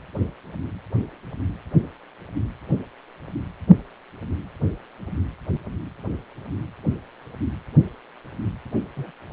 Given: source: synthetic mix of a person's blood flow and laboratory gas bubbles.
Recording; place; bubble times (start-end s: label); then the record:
Doppler ultrasound of blood flow; precordium
8.96-9.11 s: bubbles
From the record:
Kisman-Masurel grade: 121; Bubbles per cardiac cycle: 1 to 2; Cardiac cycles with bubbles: 10 to 50%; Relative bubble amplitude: barely perceptible (0.100 to 0.250); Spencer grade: 2 (many but less than half of the cardiac periods contain bubble signals, singularly or in groups); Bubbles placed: anywhere in the cardiac cycle